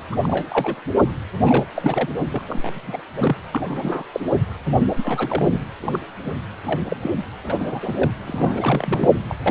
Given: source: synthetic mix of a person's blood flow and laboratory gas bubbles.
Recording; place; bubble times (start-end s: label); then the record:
Doppler ultrasound of blood flow; precordium
0.12-0.76 s: bubbles
1.46-1.65 s: bubbles
1.75-2.09 s: bubbles
2.29-2.42 s: bubbles
2.48-3.01 s: bubbles
3.13-3.36 s: bubbles
3.52-4.04 s: bubbles
4.13-4.20 s: bubbles
4.96-5.62 s: bubbles
5.81-5.99 s: bubbles
6.22-6.31 s: bubbles
6.64-6.80 s: bubbles
6.89-6.96 s: bubbles
7.01-7.11 s: bubbles
7.43-7.55 s: bubbles
7.58-8.10 s: bubbles
8.26-9.25 s: bubbles
9.29-9.35 s: bubbles
9.46-9.51 s: bubbles
From the record:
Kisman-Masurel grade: 332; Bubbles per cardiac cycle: rolling drumbeat, 9 or more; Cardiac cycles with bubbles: 50 to 99%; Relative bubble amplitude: moderate (0.250 to 0.450); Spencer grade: 3 (all of the cardiac periods contain showers or single bubble signals, but not dominating or overriding the cardiac motion signals); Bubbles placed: anywhere in the cardiac cycle